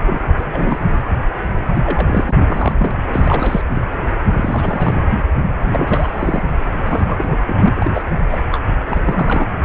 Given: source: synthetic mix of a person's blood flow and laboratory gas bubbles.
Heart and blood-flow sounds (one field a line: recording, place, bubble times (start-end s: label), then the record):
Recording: Doppler ultrasound of blood flow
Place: precordium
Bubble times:
0.05-0.34 s: bubbles
0.37-1.01 s: bubbles
1.73-1.81 s: bubbles
1.84-2.34 s: bubbles
2.48-2.75 s: bubbles
2.77-2.91 s: bubbles
3.12-3.62 s: bubbles
3.71-3.84 s: bubbles
4.34-5.07 s: bubbles
5.68-6.43 s: bubbles
6.86-7.36 s: bubbles
7.47-8.02 s: bubbles
8.30-8.42 s: bubbles
8.52-8.60 s: bubbles
8.90-9.47 s: bubbles
From the record:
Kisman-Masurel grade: 342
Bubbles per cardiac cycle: rolling drumbeat, 9 or more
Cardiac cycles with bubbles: 100%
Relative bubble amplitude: moderate (0.250 to 0.450)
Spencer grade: 3 (all of the cardiac periods contain showers or single bubble signals, but not dominating or overriding the cardiac motion signals)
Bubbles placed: anywhere in the cardiac cycle